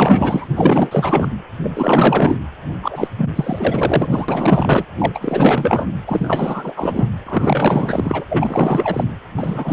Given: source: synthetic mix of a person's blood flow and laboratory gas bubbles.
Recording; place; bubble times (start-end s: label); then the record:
Doppler ultrasound of blood flow; precordium
0.00-0.48 s: bubbles
0.56-1.28 s: bubbles
1.62-2.35 s: bubbles
2.82-3.08 s: bubbles
3.17-3.31 s: bubbles
3.35-4.85 s: bubbles
4.98-5.86 s: bubbles
6.07-7.12 s: bubbles
7.25-8.23 s: bubbles
8.28-9.04 s: bubbles
9.37-9.73 s: bubbles
From the record:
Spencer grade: 4 (maximum detectable bubble signal sounding continuously throughout systole and diastole of every cardiac period, and overriding the amplitude of the normal cardiac signals); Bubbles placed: anywhere in the cardiac cycle